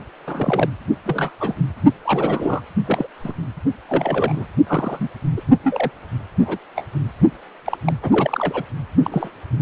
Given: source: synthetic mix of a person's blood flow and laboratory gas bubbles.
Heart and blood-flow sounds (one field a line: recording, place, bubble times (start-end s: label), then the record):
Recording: Doppler ultrasound of blood flow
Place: precordium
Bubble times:
0.27-0.69 s: bubbles
1.05-1.31 s: bubbles
1.40-1.56 s: bubbles
2.04-2.61 s: bubbles
2.85-3.07 s: bubbles
3.23-3.32 s: bubbles
3.89-4.45 s: bubbles
4.67-5.08 s: bubbles
5.36-5.41 s: bubbles
5.63-5.90 s: bubbles
6.42-6.58 s: bubbles
6.75-6.84 s: bubbles
7.65-7.77 s: bubbles
7.86-7.94 s: bubbles
8.02-8.64 s: bubbles
9.02-9.30 s: bubbles
From the record:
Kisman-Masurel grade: 242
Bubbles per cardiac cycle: several, 3 to 8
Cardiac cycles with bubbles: 100%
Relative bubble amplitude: moderate (0.250 to 0.450)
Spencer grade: 3 (all of the cardiac periods contain showers or single bubble signals, but not dominating or overriding the cardiac motion signals)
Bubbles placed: only in the low amplitude regions of the cardiac cycle